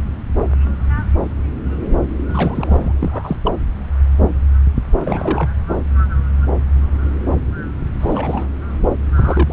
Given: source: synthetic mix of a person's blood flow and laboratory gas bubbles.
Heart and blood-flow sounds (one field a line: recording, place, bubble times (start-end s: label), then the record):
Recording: Doppler ultrasound of blood flow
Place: subclavian vein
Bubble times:
2.29-2.92 s: bubbles
2.96-3.36 s: bubbles
3.44-3.54 s: bubbles
5.05-5.49 s: bubbles
8.00-8.47 s: bubbles
9.16-9.53 s: bubbles
From the record:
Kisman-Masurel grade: 222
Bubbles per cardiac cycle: several, 3 to 8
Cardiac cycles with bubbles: 10 to 50%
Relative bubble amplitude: moderate (0.250 to 0.450)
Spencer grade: 2 (many but less than half of the cardiac periods contain bubble signals, singularly or in groups)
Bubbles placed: anywhere in the cardiac cycle